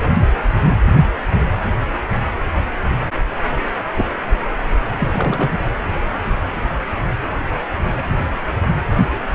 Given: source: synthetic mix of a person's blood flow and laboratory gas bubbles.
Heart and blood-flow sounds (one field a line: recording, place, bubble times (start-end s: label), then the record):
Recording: Doppler ultrasound of blood flow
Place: precordium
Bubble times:
4.98-5.08 s: bubbles
5.12-5.51 s: bubbles
From the record:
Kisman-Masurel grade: 212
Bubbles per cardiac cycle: several, 3 to 8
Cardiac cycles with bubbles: 1 to 10%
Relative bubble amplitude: moderate (0.250 to 0.450)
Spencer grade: 1 (occasional bubble signal discernible with the cardiac motion signal, with majority of cardiac periods free of bubbles)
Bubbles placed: anywhere in the cardiac cycle